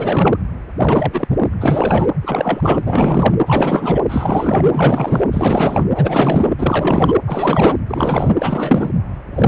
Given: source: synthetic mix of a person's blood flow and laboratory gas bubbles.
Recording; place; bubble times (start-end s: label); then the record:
Doppler ultrasound of blood flow; precordium
0.00-0.38 s: bubbles
0.78-1.27 s: bubbles
1.30-1.48 s: bubbles
1.60-2.07 s: bubbles
2.21-3.35 s: bubbles
3.46-4.00 s: bubbles
4.08-4.71 s: bubbles
4.73-5.24 s: bubbles
5.32-5.84 s: bubbles
5.95-6.55 s: bubbles
6.58-7.14 s: bubbles
7.25-7.77 s: bubbles
7.87-8.34 s: bubbles
8.38-8.90 s: bubbles
9.34-9.48 s: bubbles
From the record:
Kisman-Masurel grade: 444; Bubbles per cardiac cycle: continuous sound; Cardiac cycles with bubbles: 100%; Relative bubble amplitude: maximal (0.775 to 0.999); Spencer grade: 4 (maximum detectable bubble signal sounding continuously throughout systole and diastole of every cardiac period, and overriding the amplitude of the normal cardiac signals); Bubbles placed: anywhere in the cardiac cycle